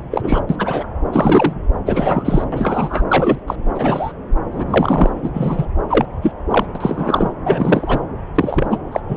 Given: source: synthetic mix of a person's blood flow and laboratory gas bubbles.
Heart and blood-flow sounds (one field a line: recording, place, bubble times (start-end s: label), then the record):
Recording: Doppler ultrasound of blood flow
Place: subclavian vein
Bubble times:
0.11-0.41 s: bubbles
0.49-0.56 s: bubbles
0.58-0.86 s: bubbles
1.12-1.54 s: bubbles
1.85-2.44 s: bubbles
2.52-3.06 s: bubbles
3.09-3.40 s: bubbles
3.47-3.56 s: bubbles
3.74-4.12 s: bubbles
4.51-4.65 s: bubbles
4.67-5.10 s: bubbles
5.23-5.29 s: bubbles
5.33-5.67 s: bubbles
5.89-6.05 s: bubbles
6.22-6.31 s: bubbles
6.50-6.66 s: bubbles
6.75-7.32 s: bubbles
7.43-7.99 s: bubbles
8.35-8.67 s: bubbles
8.71-8.78 s: bubbles
8.92-9.01 s: bubbles
9.09-9.17 s: bubbles
From the record:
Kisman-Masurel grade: 243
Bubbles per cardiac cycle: several, 3 to 8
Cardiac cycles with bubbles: 100%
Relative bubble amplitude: loud (0.450 to 0.775)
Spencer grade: 3 (all of the cardiac periods contain showers or single bubble signals, but not dominating or overriding the cardiac motion signals)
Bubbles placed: anywhere in the cardiac cycle